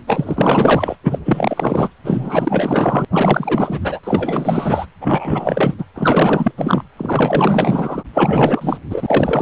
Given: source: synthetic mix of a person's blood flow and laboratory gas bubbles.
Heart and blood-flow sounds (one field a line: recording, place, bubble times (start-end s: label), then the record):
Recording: Doppler ultrasound of blood flow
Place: precordium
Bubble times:
0.07-0.95 s: bubbles
1.04-1.19 s: bubbles
1.25-1.88 s: bubbles
2.03-3.05 s: bubbles
3.12-4.00 s: bubbles
4.03-4.86 s: bubbles
5.00-5.75 s: bubbles
5.77-5.84 s: bubbles
5.95-6.51 s: bubbles
6.57-6.83 s: bubbles
6.97-8.04 s: bubbles
8.13-8.78 s: bubbles
8.90-9.42 s: bubbles
From the record:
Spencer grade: 4 (maximum detectable bubble signal sounding continuously throughout systole and diastole of every cardiac period, and overriding the amplitude of the normal cardiac signals)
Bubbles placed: anywhere in the cardiac cycle